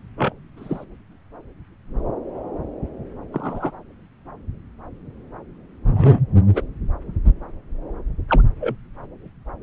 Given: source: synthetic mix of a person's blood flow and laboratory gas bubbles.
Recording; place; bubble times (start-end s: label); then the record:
Doppler ultrasound of blood flow; subclavian vein
0.17-0.33 s: bubbles
0.57-0.85 s: bubbles
3.33-3.71 s: bubbles
5.90-6.21 s: bubbles
6.54-6.62 s: bubbles
8.29-8.43 s: bubbles
8.60-8.75 s: bubbles
From the record:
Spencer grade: 2 (many but less than half of the cardiac periods contain bubble signals, singularly or in groups); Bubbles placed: anywhere in the cardiac cycle